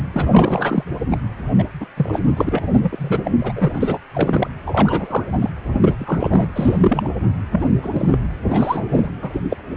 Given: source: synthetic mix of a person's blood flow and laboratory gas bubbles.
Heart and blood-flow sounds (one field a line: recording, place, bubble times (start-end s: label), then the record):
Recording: Doppler ultrasound of blood flow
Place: precordium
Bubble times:
0.14-0.83 s: bubbles
1.11-1.17 s: bubbles
1.58-1.64 s: bubbles
1.80-1.86 s: bubbles
1.97-2.21 s: bubbles
2.27-2.33 s: bubbles
2.37-2.62 s: bubbles
2.73-3.31 s: bubbles
3.40-3.52 s: bubbles
3.56-3.98 s: bubbles
4.14-4.49 s: bubbles
4.66-5.38 s: bubbles
5.41-5.50 s: bubbles
5.73-5.95 s: bubbles
5.99-6.48 s: bubbles
6.55-7.14 s: bubbles
7.51-7.66 s: bubbles
7.82-8.09 s: bubbles
8.12-8.18 s: bubbles
8.48-8.84 s: bubbles
8.88-9.10 s: bubbles
9.21-9.30 s: bubbles
9.33-9.40 s: bubbles
9.50-9.56 s: bubbles
From the record:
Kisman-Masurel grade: 243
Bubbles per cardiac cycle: several, 3 to 8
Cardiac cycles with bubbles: 100%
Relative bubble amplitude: loud (0.450 to 0.775)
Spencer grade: 3 (all of the cardiac periods contain showers or single bubble signals, but not dominating or overriding the cardiac motion signals)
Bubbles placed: anywhere in the cardiac cycle